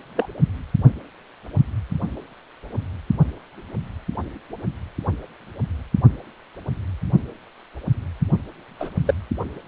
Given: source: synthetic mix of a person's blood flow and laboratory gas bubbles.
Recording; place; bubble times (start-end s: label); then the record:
Doppler ultrasound of blood flow; precordium
0.16-0.29 s: bubbles
8.80-8.89 s: bubbles
9.06-9.14 s: bubbles
From the record:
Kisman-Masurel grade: 123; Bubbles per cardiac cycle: 1 to 2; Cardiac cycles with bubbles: 10 to 50%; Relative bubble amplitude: loud (0.450 to 0.775); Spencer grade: 2 (many but less than half of the cardiac periods contain bubble signals, singularly or in groups); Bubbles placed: only in the low amplitude regions of the cardiac cycle